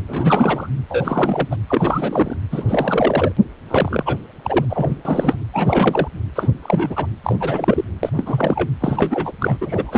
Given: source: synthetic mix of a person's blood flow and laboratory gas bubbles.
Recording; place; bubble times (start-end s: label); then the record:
Doppler ultrasound of blood flow; precordium
0.07-0.69 s: bubbles
0.89-1.49 s: bubbles
1.51-1.56 s: bubbles
1.69-2.37 s: bubbles
2.51-2.66 s: bubbles
2.68-3.32 s: bubbles
3.68-4.17 s: bubbles
4.42-4.65 s: bubbles
4.70-4.96 s: bubbles
5.05-5.36 s: bubbles
5.54-6.08 s: bubbles
6.36-6.48 s: bubbles
6.62-7.06 s: bubbles
7.24-7.37 s: bubbles
7.40-7.84 s: bubbles
8.03-8.10 s: bubbles
8.17-8.70 s: bubbles
8.80-9.32 s: bubbles
9.38-9.56 s: bubbles
9.61-9.98 s: bubbles
From the record:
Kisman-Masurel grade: 342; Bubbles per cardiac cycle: rolling drumbeat, 9 or more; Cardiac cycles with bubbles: 100%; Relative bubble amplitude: moderate (0.250 to 0.450); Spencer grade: 3 (all of the cardiac periods contain showers or single bubble signals, but not dominating or overriding the cardiac motion signals); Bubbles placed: anywhere in the cardiac cycle